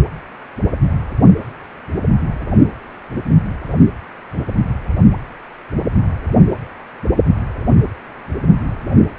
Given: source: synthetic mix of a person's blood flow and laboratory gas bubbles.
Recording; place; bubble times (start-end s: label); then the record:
Doppler ultrasound of blood flow; precordium
no bubbles
From the record:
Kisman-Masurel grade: 000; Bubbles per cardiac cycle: 0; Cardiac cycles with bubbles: 0%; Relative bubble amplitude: no bubbles discernible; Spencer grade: 0 (complete lack of bubble signals)